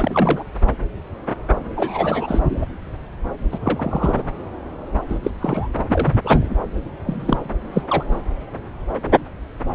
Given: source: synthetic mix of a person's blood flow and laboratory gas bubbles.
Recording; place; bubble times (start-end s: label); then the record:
Doppler ultrasound of blood flow; subclavian vein
0.00-0.44 s: bubbles
1.76-2.66 s: bubbles
3.52-3.58 s: bubbles
3.61-4.24 s: bubbles
5.08-5.19 s: bubbles
5.23-5.30 s: bubbles
5.41-5.68 s: bubbles
5.88-6.18 s: bubbles
6.24-6.55 s: bubbles
7.05-7.54 s: bubbles
7.73-7.83 s: bubbles
7.90-8.04 s: bubbles
From the record:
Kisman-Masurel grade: 232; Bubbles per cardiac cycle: several, 3 to 8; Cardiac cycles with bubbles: 50 to 99%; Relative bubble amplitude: moderate (0.250 to 0.450); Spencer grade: 3 (all of the cardiac periods contain showers or single bubble signals, but not dominating or overriding the cardiac motion signals); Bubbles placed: anywhere in the cardiac cycle